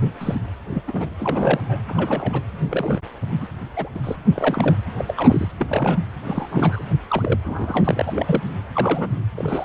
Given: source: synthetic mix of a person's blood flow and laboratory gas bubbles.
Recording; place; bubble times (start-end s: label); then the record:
Doppler ultrasound of blood flow; precordium
0.14-0.41 s: bubbles
0.70-0.82 s: bubbles
0.87-1.10 s: bubbles
1.19-1.82 s: bubbles
1.88-2.41 s: bubbles
2.70-3.00 s: bubbles
3.41-3.46 s: bubbles
3.76-3.89 s: bubbles
3.95-4.01 s: bubbles
4.04-4.17 s: bubbles
4.33-4.76 s: bubbles
4.97-5.51 s: bubbles
5.59-5.99 s: bubbles
6.25-6.83 s: bubbles
7.08-7.40 s: bubbles
7.44-8.43 s: bubbles
8.73-9.18 s: bubbles
9.38-9.65 s: bubbles
From the record:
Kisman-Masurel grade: 242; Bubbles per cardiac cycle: several, 3 to 8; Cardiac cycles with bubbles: 100%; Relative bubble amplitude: moderate (0.250 to 0.450); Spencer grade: 3 (all of the cardiac periods contain showers or single bubble signals, but not dominating or overriding the cardiac motion signals); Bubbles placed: anywhere in the cardiac cycle